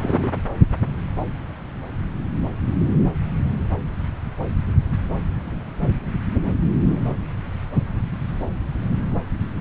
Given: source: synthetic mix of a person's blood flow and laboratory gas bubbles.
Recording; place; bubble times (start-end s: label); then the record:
Doppler ultrasound of blood flow; subclavian vein
0.00-0.29 s: bubbles
From the record:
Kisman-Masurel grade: 113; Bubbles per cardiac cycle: 1 to 2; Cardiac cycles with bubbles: 1 to 10%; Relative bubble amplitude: loud (0.450 to 0.775); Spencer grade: 1 (occasional bubble signal discernible with the cardiac motion signal, with majority of cardiac periods free of bubbles); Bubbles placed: anywhere in the cardiac cycle